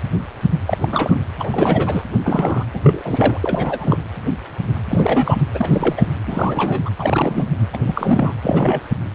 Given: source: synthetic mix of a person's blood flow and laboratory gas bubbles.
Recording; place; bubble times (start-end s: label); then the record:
Doppler ultrasound of blood flow; precordium
0.66-0.78 s: bubbles
0.82-0.89 s: bubbles
0.92-1.21 s: bubbles
1.39-2.04 s: bubbles
2.24-2.64 s: bubbles
2.73-3.98 s: bubbles
4.89-5.36 s: bubbles
5.54-6.05 s: bubbles
6.26-6.81 s: bubbles
6.85-6.90 s: bubbles
6.98-7.48 s: bubbles
7.73-7.77 s: bubbles
7.86-8.33 s: bubbles
8.42-8.83 s: bubbles
From the record:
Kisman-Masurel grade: 333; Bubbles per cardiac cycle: rolling drumbeat, 9 or more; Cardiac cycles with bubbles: 50 to 99%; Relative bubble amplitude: loud (0.450 to 0.775); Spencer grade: 3 (all of the cardiac periods contain showers or single bubble signals, but not dominating or overriding the cardiac motion signals); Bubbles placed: anywhere in the cardiac cycle